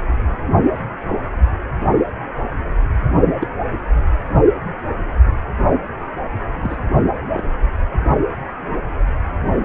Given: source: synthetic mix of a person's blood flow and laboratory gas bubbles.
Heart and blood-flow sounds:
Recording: Doppler ultrasound of blood flow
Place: precordium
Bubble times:
3.41-3.47 s: bubbles
6.62-6.77 s: bubbles
7.34-7.43 s: bubbles
8.61-8.81 s: bubbles
From the record:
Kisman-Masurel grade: 122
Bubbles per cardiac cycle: 1 to 2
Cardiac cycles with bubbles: 10 to 50%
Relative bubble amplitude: moderate (0.250 to 0.450)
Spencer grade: 2 (many but less than half of the cardiac periods contain bubble signals, singularly or in groups)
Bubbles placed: anywhere in the cardiac cycle

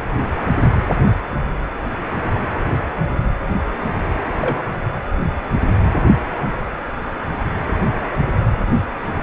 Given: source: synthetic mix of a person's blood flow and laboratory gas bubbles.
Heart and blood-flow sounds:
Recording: Doppler ultrasound of blood flow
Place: precordium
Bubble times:
4.41-4.58 s: bubbles
From the record:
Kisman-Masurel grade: 112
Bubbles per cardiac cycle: 1 to 2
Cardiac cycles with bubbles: 1 to 10%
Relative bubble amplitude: moderate (0.250 to 0.450)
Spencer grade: 1 (occasional bubble signal discernible with the cardiac motion signal, with majority of cardiac periods free of bubbles)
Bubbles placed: anywhere in the cardiac cycle

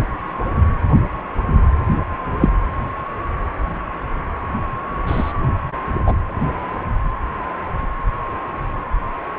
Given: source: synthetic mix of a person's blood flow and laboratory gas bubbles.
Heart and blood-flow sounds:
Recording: Doppler ultrasound of blood flow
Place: precordium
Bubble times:
2.40-2.50 s: bubbles
5.07-5.33 s: bubbles
6.06-6.16 s: bubbles
From the record:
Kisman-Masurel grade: 123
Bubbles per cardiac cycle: 1 to 2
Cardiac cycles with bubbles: 10 to 50%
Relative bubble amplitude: loud (0.450 to 0.775)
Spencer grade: 2 (many but less than half of the cardiac periods contain bubble signals, singularly or in groups)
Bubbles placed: anywhere in the cardiac cycle

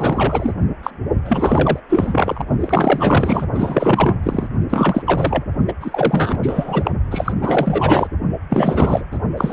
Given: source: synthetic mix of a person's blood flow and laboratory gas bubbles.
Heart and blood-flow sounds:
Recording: Doppler ultrasound of blood flow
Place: precordium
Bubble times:
0.00-0.53 s: bubbles
0.83-0.90 s: bubbles
1.25-1.79 s: bubbles
1.89-2.44 s: bubbles
2.59-3.46 s: bubbles
3.54-4.17 s: bubbles
4.23-4.48 s: bubbles
4.70-5.45 s: bubbles
5.68-5.73 s: bubbles
5.81-6.39 s: bubbles
6.42-6.91 s: bubbles
7.11-7.33 s: bubbles
7.41-8.07 s: bubbles
8.49-9.04 s: bubbles
9.11-9.18 s: bubbles
9.37-9.53 s: bubbles
From the record:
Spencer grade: 4 (maximum detectable bubble signal sounding continuously throughout systole and diastole of every cardiac period, and overriding the amplitude of the normal cardiac signals)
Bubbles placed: only in the low amplitude regions of the cardiac cycle

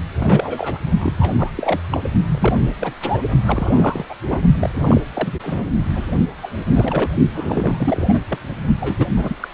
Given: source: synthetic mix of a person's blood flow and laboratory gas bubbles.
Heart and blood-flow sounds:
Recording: Doppler ultrasound of blood flow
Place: precordium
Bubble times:
0.18-0.79 s: bubbles
0.98-1.14 s: bubbles
1.19-1.52 s: bubbles
1.56-1.79 s: bubbles
1.92-2.00 s: bubbles
2.25-2.72 s: bubbles
2.80-2.93 s: bubbles
3.00-3.19 s: bubbles
3.46-4.05 s: bubbles
4.09-4.14 s: bubbles
4.30-4.38 s: bubbles
4.59-4.71 s: bubbles
4.74-5.01 s: bubbles
5.13-5.34 s: bubbles
5.43-5.70 s: bubbles
5.95-6.04 s: bubbles
6.42-6.50 s: bubbles
6.75-7.12 s: bubbles
7.32-8.20 s: bubbles
8.28-8.38 s: bubbles
8.80-9.06 s: bubbles
9.16-9.36 s: bubbles
9.40-9.48 s: bubbles
From the record:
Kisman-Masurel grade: 342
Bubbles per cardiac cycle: rolling drumbeat, 9 or more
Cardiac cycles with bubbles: 100%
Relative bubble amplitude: moderate (0.250 to 0.450)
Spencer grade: 3 (all of the cardiac periods contain showers or single bubble signals, but not dominating or overriding the cardiac motion signals)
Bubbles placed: only in the low amplitude regions of the cardiac cycle

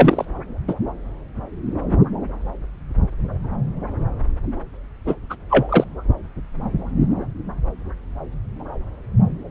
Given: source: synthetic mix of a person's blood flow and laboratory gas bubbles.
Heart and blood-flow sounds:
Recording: Doppler ultrasound of blood flow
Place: subclavian vein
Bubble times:
0.00-0.25 s: bubbles
0.68-0.74 s: bubbles
5.06-5.15 s: bubbles
5.29-5.36 s: bubbles
5.49-5.85 s: bubbles
From the record:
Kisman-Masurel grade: 223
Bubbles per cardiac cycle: several, 3 to 8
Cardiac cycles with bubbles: 10 to 50%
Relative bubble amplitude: loud (0.450 to 0.775)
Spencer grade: 2 (many but less than half of the cardiac periods contain bubble signals, singularly or in groups)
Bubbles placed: anywhere in the cardiac cycle

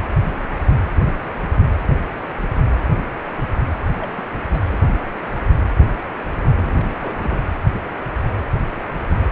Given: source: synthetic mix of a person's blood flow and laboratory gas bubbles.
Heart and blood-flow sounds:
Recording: Doppler ultrasound of blood flow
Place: precordium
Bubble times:
3.97-4.12 s: bubbles
4.14-4.23 s: bubbles
4.50-4.62 s: bubbles
4.65-4.78 s: bubbles
6.57-6.85 s: bubbles
7.00-7.17 s: bubbles
7.20-7.38 s: bubbles
From the record:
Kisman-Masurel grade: 221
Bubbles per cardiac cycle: several, 3 to 8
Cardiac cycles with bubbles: 10 to 50%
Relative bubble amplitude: barely perceptible (0.100 to 0.250)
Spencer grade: 2 (many but less than half of the cardiac periods contain bubble signals, singularly or in groups)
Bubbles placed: anywhere in the cardiac cycle

